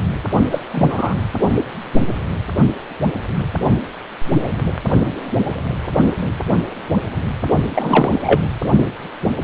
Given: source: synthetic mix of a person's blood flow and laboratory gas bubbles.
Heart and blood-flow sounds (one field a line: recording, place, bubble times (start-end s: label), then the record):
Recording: Doppler ultrasound of blood flow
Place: precordium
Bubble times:
0.51-0.59 s: bubbles
0.71-1.16 s: bubbles
7.75-8.49 s: bubbles
From the record:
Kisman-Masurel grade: 223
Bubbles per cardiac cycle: several, 3 to 8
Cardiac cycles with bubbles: 10 to 50%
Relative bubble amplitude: loud (0.450 to 0.775)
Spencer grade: 2 (many but less than half of the cardiac periods contain bubble signals, singularly or in groups)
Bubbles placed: only in the low amplitude regions of the cardiac cycle